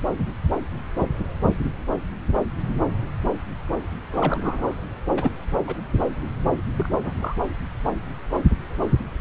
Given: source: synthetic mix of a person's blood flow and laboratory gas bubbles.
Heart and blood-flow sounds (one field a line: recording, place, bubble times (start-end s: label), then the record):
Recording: Doppler ultrasound of blood flow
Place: subclavian vein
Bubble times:
4.12-4.74 s: bubbles
5.11-5.32 s: bubbles
5.52-5.63 s: bubbles
5.67-5.76 s: bubbles
6.74-6.94 s: bubbles
6.97-7.14 s: bubbles
7.18-7.35 s: bubbles
From the record:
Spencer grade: 2 (many but less than half of the cardiac periods contain bubble signals, singularly or in groups)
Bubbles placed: anywhere in the cardiac cycle